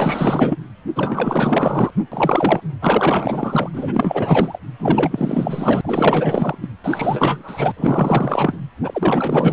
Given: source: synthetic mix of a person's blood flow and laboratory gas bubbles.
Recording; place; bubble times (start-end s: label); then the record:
Doppler ultrasound of blood flow; precordium
0.00-0.56 s: bubbles
0.95-1.91 s: bubbles
2.12-2.61 s: bubbles
2.81-3.69 s: bubbles
3.73-4.59 s: bubbles
4.79-6.57 s: bubbles
6.62-6.67 s: bubbles
6.84-7.72 s: bubbles
7.76-8.57 s: bubbles
8.82-9.53 s: bubbles
From the record:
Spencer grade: 4 (maximum detectable bubble signal sounding continuously throughout systole and diastole of every cardiac period, and overriding the amplitude of the normal cardiac signals); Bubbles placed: anywhere in the cardiac cycle